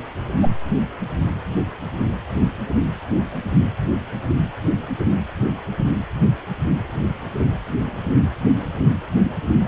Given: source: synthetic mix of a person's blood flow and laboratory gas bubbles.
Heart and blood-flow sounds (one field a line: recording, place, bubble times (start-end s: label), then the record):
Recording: Doppler ultrasound of blood flow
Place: precordium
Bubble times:
0.42-0.50 s: bubbles
From the record:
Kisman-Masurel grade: 112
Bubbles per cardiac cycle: 1 to 2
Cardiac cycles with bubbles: 1 to 10%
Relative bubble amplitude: moderate (0.250 to 0.450)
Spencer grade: 1 (occasional bubble signal discernible with the cardiac motion signal, with majority of cardiac periods free of bubbles)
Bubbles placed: anywhere in the cardiac cycle